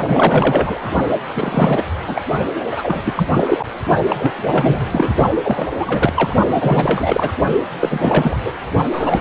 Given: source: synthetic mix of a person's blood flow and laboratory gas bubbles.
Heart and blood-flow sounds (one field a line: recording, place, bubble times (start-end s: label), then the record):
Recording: Doppler ultrasound of blood flow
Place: precordium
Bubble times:
0.02-0.91 s: bubbles
1.35-1.85 s: bubbles
2.07-2.22 s: bubbles
2.71-3.02 s: bubbles
3.04-3.29 s: bubbles
3.34-3.65 s: bubbles
4.08-4.86 s: bubbles
4.92-5.13 s: bubbles
5.42-5.67 s: bubbles
5.79-6.13 s: bubbles
6.16-6.35 s: bubbles
6.52-7.31 s: bubbles
7.80-8.37 s: bubbles
8.45-8.52 s: bubbles
8.92-9.21 s: bubbles
From the record:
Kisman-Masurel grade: 343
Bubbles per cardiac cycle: rolling drumbeat, 9 or more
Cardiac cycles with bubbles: 100%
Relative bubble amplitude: loud (0.450 to 0.775)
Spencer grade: 3 (all of the cardiac periods contain showers or single bubble signals, but not dominating or overriding the cardiac motion signals)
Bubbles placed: only in the low amplitude regions of the cardiac cycle